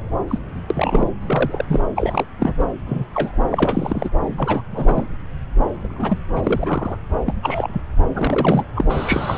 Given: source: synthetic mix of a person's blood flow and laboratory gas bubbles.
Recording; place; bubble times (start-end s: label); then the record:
Doppler ultrasound of blood flow; subclavian vein
0.28-0.39 s: bubbles
0.70-1.10 s: bubbles
1.21-1.65 s: bubbles
1.69-1.80 s: bubbles
1.96-2.25 s: bubbles
2.39-2.64 s: bubbles
2.86-3.05 s: bubbles
3.13-3.38 s: bubbles
3.51-4.09 s: bubbles
4.35-4.61 s: bubbles
4.71-5.08 s: bubbles
5.80-6.20 s: bubbles
6.35-6.96 s: bubbles
7.25-7.33 s: bubbles
7.42-7.82 s: bubbles
8.14-8.64 s: bubbles
8.76-9.38 s: bubbles
From the record:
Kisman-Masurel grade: 242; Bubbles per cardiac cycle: several, 3 to 8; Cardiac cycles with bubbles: 100%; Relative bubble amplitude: moderate (0.250 to 0.450); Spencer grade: 3 (all of the cardiac periods contain showers or single bubble signals, but not dominating or overriding the cardiac motion signals); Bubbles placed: anywhere in the cardiac cycle